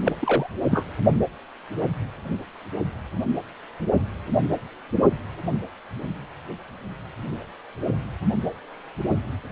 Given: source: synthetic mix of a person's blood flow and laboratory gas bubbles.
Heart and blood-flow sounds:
Doppler ultrasound of blood flow; precordium
0.04-0.12 s: bubbles
0.19-0.47 s: bubbles
0.70-0.85 s: bubbles
From the record:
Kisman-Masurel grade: 212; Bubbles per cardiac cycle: several, 3 to 8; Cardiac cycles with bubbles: 1 to 10%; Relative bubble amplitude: moderate (0.250 to 0.450); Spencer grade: 1 (occasional bubble signal discernible with the cardiac motion signal, with majority of cardiac periods free of bubbles); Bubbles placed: only in the low amplitude regions of the cardiac cycle

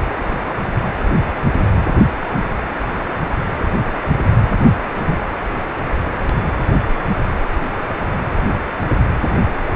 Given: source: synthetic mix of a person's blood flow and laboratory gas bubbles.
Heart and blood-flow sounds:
Doppler ultrasound of blood flow; precordium
4.61-4.71 s: bubbles
5.07-5.20 s: bubbles
From the record:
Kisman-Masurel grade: 112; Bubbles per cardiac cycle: 1 to 2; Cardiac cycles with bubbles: 1 to 10%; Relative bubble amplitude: moderate (0.250 to 0.450); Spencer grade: 1 (occasional bubble signal discernible with the cardiac motion signal, with majority of cardiac periods free of bubbles); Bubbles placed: anywhere in the cardiac cycle

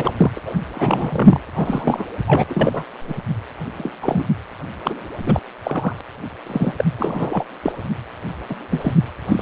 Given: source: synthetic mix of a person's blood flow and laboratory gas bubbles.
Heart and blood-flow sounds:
Doppler ultrasound of blood flow; precordium
0.00-0.11 s: bubbles
0.16-0.31 s: bubbles
0.35-0.40 s: bubbles
0.45-0.55 s: bubbles
0.74-1.40 s: bubbles
1.54-2.05 s: bubbles
2.27-2.43 s: bubbles
2.49-2.83 s: bubbles
3.07-3.14 s: bubbles
3.78-3.90 s: bubbles
4.02-4.25 s: bubbles
4.84-4.94 s: bubbles
5.26-5.40 s: bubbles
5.64-6.01 s: bubbles
6.46-6.74 s: bubbles
6.77-6.84 s: bubbles
6.98-7.46 s: bubbles
7.63-7.72 s: bubbles
8.49-8.56 s: bubbles
8.71-8.93 s: bubbles
9.28-9.42 s: bubbles
From the record:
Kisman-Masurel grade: 242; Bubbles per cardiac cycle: several, 3 to 8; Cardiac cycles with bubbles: 100%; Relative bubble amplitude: moderate (0.250 to 0.450); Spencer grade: 3 (all of the cardiac periods contain showers or single bubble signals, but not dominating or overriding the cardiac motion signals); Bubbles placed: anywhere in the cardiac cycle

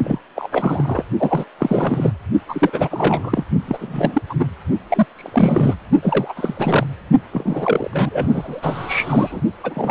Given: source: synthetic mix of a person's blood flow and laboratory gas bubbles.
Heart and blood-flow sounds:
Doppler ultrasound of blood flow; precordium
0.04-0.19 s: bubbles
0.35-0.48 s: bubbles
0.52-1.03 s: bubbles
1.18-1.45 s: bubbles
1.58-2.12 s: bubbles
2.49-2.70 s: bubbles
2.73-3.44 s: bubbles
3.68-4.22 s: bubbles
4.29-4.34 s: bubbles
4.38-4.47 s: bubbles
4.89-5.05 s: bubbles
5.15-5.75 s: bubbles
6.02-6.34 s: bubbles
6.36-6.85 s: bubbles
7.32-9.41 s: bubbles
9.63-9.91 s: bubbles
From the record:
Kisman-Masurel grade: 343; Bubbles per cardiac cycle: rolling drumbeat, 9 or more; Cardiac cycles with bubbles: 100%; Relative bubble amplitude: loud (0.450 to 0.775); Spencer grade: 3 (all of the cardiac periods contain showers or single bubble signals, but not dominating or overriding the cardiac motion signals); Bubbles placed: only in the low amplitude regions of the cardiac cycle

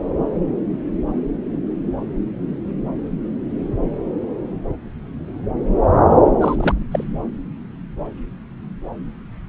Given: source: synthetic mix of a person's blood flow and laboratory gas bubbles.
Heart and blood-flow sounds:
Doppler ultrasound of blood flow; subclavian vein
6.40-6.75 s: bubbles
6.92-7.04 s: bubbles
From the record:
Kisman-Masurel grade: 222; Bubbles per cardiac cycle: several, 3 to 8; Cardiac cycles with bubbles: 10 to 50%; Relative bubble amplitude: moderate (0.250 to 0.450); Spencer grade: 2 (many but less than half of the cardiac periods contain bubble signals, singularly or in groups); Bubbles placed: anywhere in the cardiac cycle

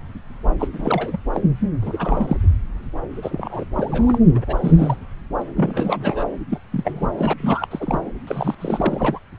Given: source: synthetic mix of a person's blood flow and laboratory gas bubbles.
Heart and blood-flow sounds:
Doppler ultrasound of blood flow; subclavian vein
0.59-0.68 s: bubbles
0.73-1.17 s: bubbles
1.32-1.42 s: bubbles
1.82-2.37 s: bubbles
3.11-3.64 s: bubbles
3.74-4.18 s: bubbles
4.34-4.96 s: bubbles
5.56-6.25 s: bubbles
6.50-6.58 s: bubbles
6.72-7.08 s: bubbles
7.12-7.33 s: bubbles
7.40-7.67 s: bubbles
7.71-8.00 s: bubbles
8.27-8.54 s: bubbles
8.58-9.19 s: bubbles
From the record:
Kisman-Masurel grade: 342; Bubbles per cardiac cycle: rolling drumbeat, 9 or more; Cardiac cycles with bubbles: 100%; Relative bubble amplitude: moderate (0.250 to 0.450); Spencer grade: 3 (all of the cardiac periods contain showers or single bubble signals, but not dominating or overriding the cardiac motion signals); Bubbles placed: anywhere in the cardiac cycle

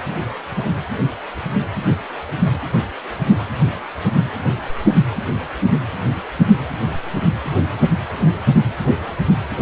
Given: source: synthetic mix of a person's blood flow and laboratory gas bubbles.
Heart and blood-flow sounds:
Doppler ultrasound of blood flow; precordium
no bubbles
From the record:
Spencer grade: 0 (complete lack of bubble signals)

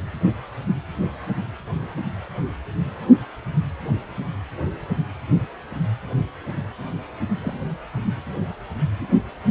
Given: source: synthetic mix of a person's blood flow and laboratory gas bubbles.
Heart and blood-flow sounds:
Doppler ultrasound of blood flow; precordium
7.41-7.54 s: bubbles
From the record:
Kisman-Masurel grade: 111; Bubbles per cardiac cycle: 1 to 2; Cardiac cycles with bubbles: 1 to 10%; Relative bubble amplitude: barely perceptible (0.100 to 0.250); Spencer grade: 1 (occasional bubble signal discernible with the cardiac motion signal, with majority of cardiac periods free of bubbles); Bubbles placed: anywhere in the cardiac cycle

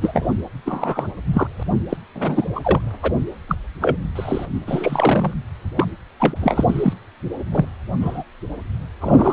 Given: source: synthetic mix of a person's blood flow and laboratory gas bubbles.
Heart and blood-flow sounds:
Doppler ultrasound of blood flow; precordium
0.01-0.31 s: bubbles
0.65-1.08 s: bubbles
1.33-1.47 s: bubbles
1.59-1.63 s: bubbles
1.89-1.97 s: bubbles
2.15-2.45 s: bubbles
2.55-2.60 s: bubbles
2.64-2.92 s: bubbles
3.02-3.12 s: bubbles
3.48-3.56 s: bubbles
3.81-3.97 s: bubbles
4.15-4.46 s: bubbles
4.54-4.61 s: bubbles
4.67-5.34 s: bubbles
5.75-5.86 s: bubbles
6.20-6.36 s: bubbles
6.41-6.64 s: bubbles
6.69-6.94 s: bubbles
7.51-7.66 s: bubbles
8.01-8.23 s: bubbles
9.01-9.33 s: bubbles
From the record:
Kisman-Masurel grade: 242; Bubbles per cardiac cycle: several, 3 to 8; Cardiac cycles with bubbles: 100%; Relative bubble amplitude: moderate (0.250 to 0.450); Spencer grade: 3 (all of the cardiac periods contain showers or single bubble signals, but not dominating or overriding the cardiac motion signals); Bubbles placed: anywhere in the cardiac cycle

